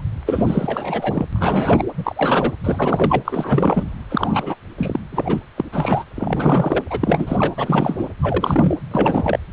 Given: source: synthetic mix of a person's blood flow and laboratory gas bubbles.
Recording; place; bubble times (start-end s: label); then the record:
Doppler ultrasound of blood flow; precordium
0.26-1.26 s: bubbles
1.32-1.84 s: bubbles
1.97-2.52 s: bubbles
2.63-3.23 s: bubbles
3.25-3.84 s: bubbles
4.10-4.55 s: bubbles
4.78-5.00 s: bubbles
5.12-5.39 s: bubbles
5.57-5.65 s: bubbles
5.72-6.04 s: bubbles
6.16-6.84 s: bubbles
6.91-7.53 s: bubbles
7.57-8.09 s: bubbles
8.21-8.75 s: bubbles
8.91-9.39 s: bubbles
From the record:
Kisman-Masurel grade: 342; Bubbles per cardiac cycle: rolling drumbeat, 9 or more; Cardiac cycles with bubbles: 100%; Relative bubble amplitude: moderate (0.250 to 0.450); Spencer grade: 3 (all of the cardiac periods contain showers or single bubble signals, but not dominating or overriding the cardiac motion signals); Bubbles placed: anywhere in the cardiac cycle